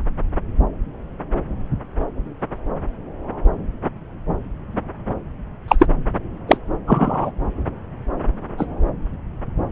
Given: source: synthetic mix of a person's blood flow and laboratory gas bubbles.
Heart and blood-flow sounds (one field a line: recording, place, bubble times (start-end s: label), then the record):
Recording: Doppler ultrasound of blood flow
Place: subclavian vein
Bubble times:
5.68-5.75 s: bubbles
5.79-5.86 s: bubbles
6.48-6.57 s: bubbles
6.86-7.31 s: bubbles
8.57-8.65 s: bubbles
From the record:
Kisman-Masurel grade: 123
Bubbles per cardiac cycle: 1 to 2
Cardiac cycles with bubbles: 10 to 50%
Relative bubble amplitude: loud (0.450 to 0.775)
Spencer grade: 2 (many but less than half of the cardiac periods contain bubble signals, singularly or in groups)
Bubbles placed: anywhere in the cardiac cycle